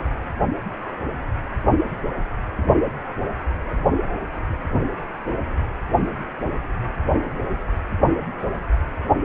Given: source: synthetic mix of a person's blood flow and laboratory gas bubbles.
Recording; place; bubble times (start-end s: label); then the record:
Doppler ultrasound of blood flow; precordium
no bubbles
From the record:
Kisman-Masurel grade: 000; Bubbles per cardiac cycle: 0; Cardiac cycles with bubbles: 0%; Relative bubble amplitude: no bubbles discernible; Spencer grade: 0 (complete lack of bubble signals)